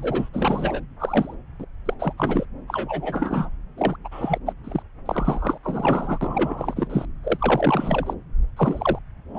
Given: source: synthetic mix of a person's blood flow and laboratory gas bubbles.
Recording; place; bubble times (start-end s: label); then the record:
Doppler ultrasound of blood flow; subclavian vein
0.00-0.29 s: bubbles
0.33-0.80 s: bubbles
1.00-1.35 s: bubbles
1.59-1.65 s: bubbles
1.85-1.94 s: bubbles
2.00-2.13 s: bubbles
2.17-2.45 s: bubbles
2.67-3.50 s: bubbles
3.77-3.96 s: bubbles
4.04-4.08 s: bubbles
4.11-4.38 s: bubbles
4.46-4.53 s: bubbles
4.64-4.82 s: bubbles
5.06-5.58 s: bubbles
5.63-6.18 s: bubbles
6.21-7.05 s: bubbles
7.23-8.13 s: bubbles
8.56-8.99 s: bubbles
9.34-9.39 s: bubbles
From the record:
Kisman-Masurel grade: 342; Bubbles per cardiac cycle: rolling drumbeat, 9 or more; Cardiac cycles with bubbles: 100%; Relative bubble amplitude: moderate (0.250 to 0.450); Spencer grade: 3 (all of the cardiac periods contain showers or single bubble signals, but not dominating or overriding the cardiac motion signals); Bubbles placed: anywhere in the cardiac cycle